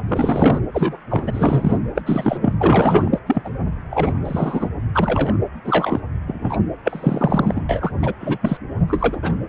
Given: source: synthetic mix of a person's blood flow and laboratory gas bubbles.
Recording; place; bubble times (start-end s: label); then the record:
Doppler ultrasound of blood flow; precordium
0.08-0.60 s: bubbles
0.73-0.97 s: bubbles
1.10-1.78 s: bubbles
1.95-2.02 s: bubbles
2.06-2.53 s: bubbles
2.60-3.10 s: bubbles
3.12-3.19 s: bubbles
3.26-3.49 s: bubbles
3.90-4.13 s: bubbles
4.25-4.69 s: bubbles
4.93-5.38 s: bubbles
5.65-6.00 s: bubbles
6.26-6.57 s: bubbles
6.84-7.66 s: bubbles
7.69-7.92 s: bubbles
8.02-8.12 s: bubbles
8.19-8.38 s: bubbles
8.41-8.57 s: bubbles
8.87-9.43 s: bubbles
From the record:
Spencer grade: 3 (all of the cardiac periods contain showers or single bubble signals, but not dominating or overriding the cardiac motion signals); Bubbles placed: anywhere in the cardiac cycle